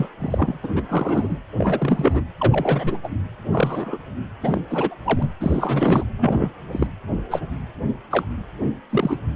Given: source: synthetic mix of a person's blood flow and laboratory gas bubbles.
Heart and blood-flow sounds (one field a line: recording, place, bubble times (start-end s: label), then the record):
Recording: Doppler ultrasound of blood flow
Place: precordium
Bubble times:
0.00-0.09 s: bubbles
0.20-0.58 s: bubbles
0.63-0.69 s: bubbles
0.76-0.83 s: bubbles
0.89-1.38 s: bubbles
1.58-2.22 s: bubbles
2.40-2.98 s: bubbles
3.03-3.08 s: bubbles
3.52-3.98 s: bubbles
4.43-4.60 s: bubbles
4.70-4.97 s: bubbles
5.05-5.28 s: bubbles
5.40-6.04 s: bubbles
6.18-6.50 s: bubbles
6.71-6.87 s: bubbles
7.30-7.40 s: bubbles
8.11-8.25 s: bubbles
8.90-9.19 s: bubbles
From the record:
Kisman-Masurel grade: 242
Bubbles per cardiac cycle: several, 3 to 8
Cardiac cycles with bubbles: 100%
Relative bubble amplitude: moderate (0.250 to 0.450)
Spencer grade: 3 (all of the cardiac periods contain showers or single bubble signals, but not dominating or overriding the cardiac motion signals)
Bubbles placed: anywhere in the cardiac cycle